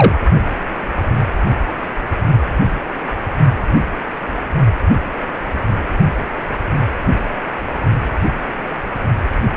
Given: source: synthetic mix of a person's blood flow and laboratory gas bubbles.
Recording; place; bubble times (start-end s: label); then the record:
Doppler ultrasound of blood flow; precordium
0.00-0.15 s: bubbles
From the record:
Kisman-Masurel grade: 123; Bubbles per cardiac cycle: 1 to 2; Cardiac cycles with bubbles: 10 to 50%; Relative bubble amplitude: loud (0.450 to 0.775); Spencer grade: 2 (many but less than half of the cardiac periods contain bubble signals, singularly or in groups); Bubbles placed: only in the low amplitude regions of the cardiac cycle